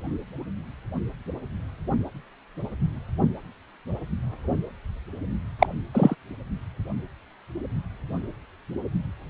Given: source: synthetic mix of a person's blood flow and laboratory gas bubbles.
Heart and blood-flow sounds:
Doppler ultrasound of blood flow; precordium
5.59-5.67 s: bubbles
5.94-6.15 s: bubbles
From the record:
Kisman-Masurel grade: 113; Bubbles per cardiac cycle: 1 to 2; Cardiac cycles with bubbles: 1 to 10%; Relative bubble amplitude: loud (0.450 to 0.775); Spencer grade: 1 (occasional bubble signal discernible with the cardiac motion signal, with majority of cardiac periods free of bubbles); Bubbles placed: anywhere in the cardiac cycle

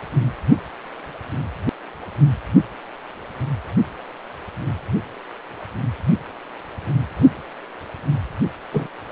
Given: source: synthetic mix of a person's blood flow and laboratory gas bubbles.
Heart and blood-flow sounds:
Doppler ultrasound of blood flow; precordium
8.71-8.87 s: bubbles
From the record:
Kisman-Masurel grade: 112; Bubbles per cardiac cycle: 1 to 2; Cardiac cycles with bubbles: 1 to 10%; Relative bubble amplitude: moderate (0.250 to 0.450); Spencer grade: 1 (occasional bubble signal discernible with the cardiac motion signal, with majority of cardiac periods free of bubbles); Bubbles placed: anywhere in the cardiac cycle

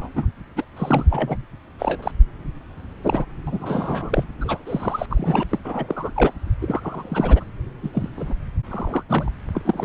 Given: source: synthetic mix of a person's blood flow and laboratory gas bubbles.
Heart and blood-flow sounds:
Doppler ultrasound of blood flow; subclavian vein
0.00-0.09 s: bubbles
0.15-0.31 s: bubbles
0.56-0.65 s: bubbles
0.77-1.36 s: bubbles
1.79-2.11 s: bubbles
3.04-3.25 s: bubbles
3.47-4.24 s: bubbles
4.41-4.62 s: bubbles
4.66-5.06 s: bubbles
5.10-5.43 s: bubbles
5.50-5.59 s: bubbles
5.64-6.11 s: bubbles
6.16-6.33 s: bubbles
6.61-7.44 s: bubbles
7.83-7.89 s: bubbles
7.93-8.08 s: bubbles
8.16-8.34 s: bubbles
8.70-9.03 s: bubbles
9.09-9.31 s: bubbles
9.54-9.62 s: bubbles
9.65-9.85 s: bubbles
From the record:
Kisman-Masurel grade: 342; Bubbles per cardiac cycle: rolling drumbeat, 9 or more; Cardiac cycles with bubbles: 100%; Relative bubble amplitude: moderate (0.250 to 0.450); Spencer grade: 3 (all of the cardiac periods contain showers or single bubble signals, but not dominating or overriding the cardiac motion signals); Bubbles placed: anywhere in the cardiac cycle

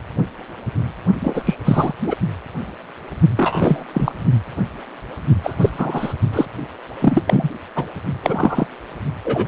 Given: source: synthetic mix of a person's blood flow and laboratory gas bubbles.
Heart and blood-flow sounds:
Doppler ultrasound of blood flow; precordium
1.20-1.43 s: bubbles
1.46-1.56 s: bubbles
1.65-1.93 s: bubbles
2.07-2.16 s: bubbles
3.36-3.85 s: bubbles
3.93-4.12 s: bubbles
5.43-5.55 s: bubbles
5.61-5.70 s: bubbles
5.78-6.14 s: bubbles
6.33-6.46 s: bubbles
7.00-7.23 s: bubbles
7.27-7.49 s: bubbles
7.76-7.85 s: bubbles
8.22-8.66 s: bubbles
9.24-9.48 s: bubbles
From the record:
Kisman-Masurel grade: 233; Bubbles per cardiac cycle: several, 3 to 8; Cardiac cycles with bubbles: 50 to 99%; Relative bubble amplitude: loud (0.450 to 0.775); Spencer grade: 3 (all of the cardiac periods contain showers or single bubble signals, but not dominating or overriding the cardiac motion signals); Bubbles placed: only in the low amplitude regions of the cardiac cycle

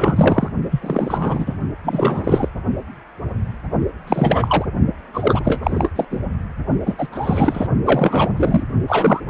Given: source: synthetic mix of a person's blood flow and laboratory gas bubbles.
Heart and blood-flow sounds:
Doppler ultrasound of blood flow; precordium
0.00-0.49 s: bubbles
0.71-1.57 s: bubbles
1.84-2.48 s: bubbles
4.07-4.65 s: bubbles
5.13-5.89 s: bubbles
5.96-6.05 s: bubbles
6.10-6.20 s: bubbles
6.85-6.95 s: bubbles
6.98-7.08 s: bubbles
7.12-7.67 s: bubbles
7.84-8.30 s: bubbles
8.37-8.64 s: bubbles
8.87-9.20 s: bubbles
9.26-9.30 s: bubbles
From the record:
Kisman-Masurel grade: 333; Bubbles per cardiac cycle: rolling drumbeat, 9 or more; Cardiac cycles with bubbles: 50 to 99%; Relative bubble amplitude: loud (0.450 to 0.775); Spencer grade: 3 (all of the cardiac periods contain showers or single bubble signals, but not dominating or overriding the cardiac motion signals); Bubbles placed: only in the low amplitude regions of the cardiac cycle

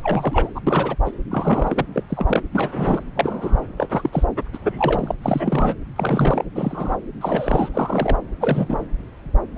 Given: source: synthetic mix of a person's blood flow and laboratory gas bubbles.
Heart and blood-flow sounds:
Doppler ultrasound of blood flow; subclavian vein
0.00-0.49 s: bubbles
0.54-0.60 s: bubbles
0.67-0.96 s: bubbles
1.05-1.12 s: bubbles
1.30-1.84 s: bubbles
1.94-2.03 s: bubbles
2.08-2.42 s: bubbles
2.52-2.69 s: bubbles
2.71-3.04 s: bubbles
3.15-3.61 s: bubbles
3.77-4.10 s: bubbles
4.12-4.26 s: bubbles
4.53-4.59 s: bubbles
4.62-5.15 s: bubbles
5.23-5.75 s: bubbles
5.96-6.45 s: bubbles
6.55-6.99 s: bubbles
7.21-7.69 s: bubbles
7.74-8.17 s: bubbles
8.41-8.87 s: bubbles
9.55-9.58 s: bubbles
From the record:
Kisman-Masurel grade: 232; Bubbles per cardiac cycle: several, 3 to 8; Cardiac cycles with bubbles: 50 to 99%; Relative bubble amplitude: moderate (0.250 to 0.450); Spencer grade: 3 (all of the cardiac periods contain showers or single bubble signals, but not dominating or overriding the cardiac motion signals); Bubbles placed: anywhere in the cardiac cycle

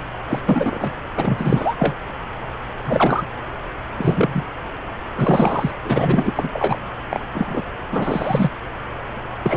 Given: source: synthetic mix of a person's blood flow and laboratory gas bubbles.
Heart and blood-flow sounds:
Doppler ultrasound of blood flow; subclavian vein
0.28-0.41 s: bubbles
0.45-0.95 s: bubbles
1.17-1.76 s: bubbles
1.79-1.95 s: bubbles
2.84-3.27 s: bubbles
3.97-4.43 s: bubbles
5.17-5.71 s: bubbles
5.84-6.33 s: bubbles
6.35-6.79 s: bubbles
7.10-7.19 s: bubbles
7.34-7.62 s: bubbles
7.92-8.50 s: bubbles
9.43-9.57 s: bubbles
From the record:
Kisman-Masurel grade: 233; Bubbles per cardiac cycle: several, 3 to 8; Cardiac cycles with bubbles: 50 to 99%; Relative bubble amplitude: loud (0.450 to 0.775); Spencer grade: 3 (all of the cardiac periods contain showers or single bubble signals, but not dominating or overriding the cardiac motion signals); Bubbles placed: anywhere in the cardiac cycle

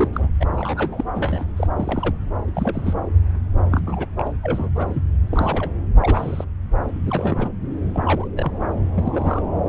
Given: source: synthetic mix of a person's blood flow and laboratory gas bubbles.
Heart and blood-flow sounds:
Doppler ultrasound of blood flow; subclavian vein
0.00-0.08 s: bubbles
0.13-0.30 s: bubbles
0.40-0.45 s: bubbles
0.56-1.04 s: bubbles
1.13-1.44 s: bubbles
1.56-1.67 s: bubbles
1.77-2.15 s: bubbles
2.47-2.51 s: bubbles
2.54-2.94 s: bubbles
3.71-4.07 s: bubbles
4.17-4.34 s: bubbles
4.43-4.70 s: bubbles
4.77-5.04 s: bubbles
5.30-5.71 s: bubbles
5.95-6.45 s: bubbles
7.05-7.50 s: bubbles
7.93-8.28 s: bubbles
8.36-8.52 s: bubbles
8.94-9.42 s: bubbles
From the record:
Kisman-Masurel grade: 242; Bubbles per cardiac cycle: several, 3 to 8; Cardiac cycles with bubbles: 100%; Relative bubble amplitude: moderate (0.250 to 0.450); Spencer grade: 3 (all of the cardiac periods contain showers or single bubble signals, but not dominating or overriding the cardiac motion signals); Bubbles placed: anywhere in the cardiac cycle

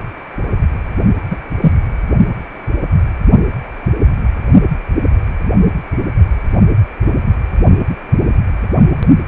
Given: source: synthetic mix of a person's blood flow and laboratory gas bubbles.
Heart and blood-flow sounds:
Doppler ultrasound of blood flow; precordium
1.31-1.38 s: bubbles
1.61-1.72 s: bubbles
From the record:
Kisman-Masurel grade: 113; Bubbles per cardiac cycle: 1 to 2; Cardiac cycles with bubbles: 1 to 10%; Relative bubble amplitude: loud (0.450 to 0.775); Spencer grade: 1 (occasional bubble signal discernible with the cardiac motion signal, with majority of cardiac periods free of bubbles); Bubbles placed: only in the low amplitude regions of the cardiac cycle

